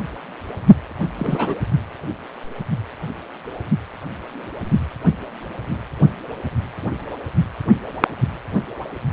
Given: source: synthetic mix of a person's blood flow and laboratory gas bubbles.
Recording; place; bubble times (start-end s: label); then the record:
Doppler ultrasound of blood flow; precordium
0.00-0.03 s: bubbles
1.15-1.56 s: bubbles
From the record:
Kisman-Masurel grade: 212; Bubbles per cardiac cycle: several, 3 to 8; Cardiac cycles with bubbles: 1 to 10%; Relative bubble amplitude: moderate (0.250 to 0.450); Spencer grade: 1 (occasional bubble signal discernible with the cardiac motion signal, with majority of cardiac periods free of bubbles); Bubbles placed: anywhere in the cardiac cycle